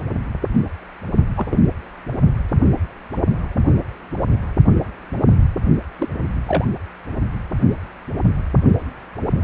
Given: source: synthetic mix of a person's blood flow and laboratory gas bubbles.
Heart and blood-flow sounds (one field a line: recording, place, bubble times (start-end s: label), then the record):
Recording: Doppler ultrasound of blood flow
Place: precordium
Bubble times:
1.37-1.46 s: bubbles
1.49-1.58 s: bubbles
5.99-6.08 s: bubbles
6.46-6.64 s: bubbles
From the record:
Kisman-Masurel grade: 122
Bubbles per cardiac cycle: 1 to 2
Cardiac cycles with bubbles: 10 to 50%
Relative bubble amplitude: moderate (0.250 to 0.450)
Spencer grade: 2 (many but less than half of the cardiac periods contain bubble signals, singularly or in groups)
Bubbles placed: only in the low amplitude regions of the cardiac cycle